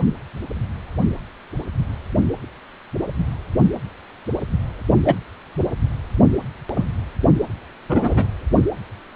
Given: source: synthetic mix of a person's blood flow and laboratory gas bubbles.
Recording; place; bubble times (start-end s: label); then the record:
Doppler ultrasound of blood flow; precordium
5.05-5.16 s: bubbles
6.75-6.85 s: bubbles
7.89-8.27 s: bubbles
From the record:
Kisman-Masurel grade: 123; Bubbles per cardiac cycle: 1 to 2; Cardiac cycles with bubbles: 10 to 50%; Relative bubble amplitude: loud (0.450 to 0.775); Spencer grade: 2 (many but less than half of the cardiac periods contain bubble signals, singularly or in groups); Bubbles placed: only in the low amplitude regions of the cardiac cycle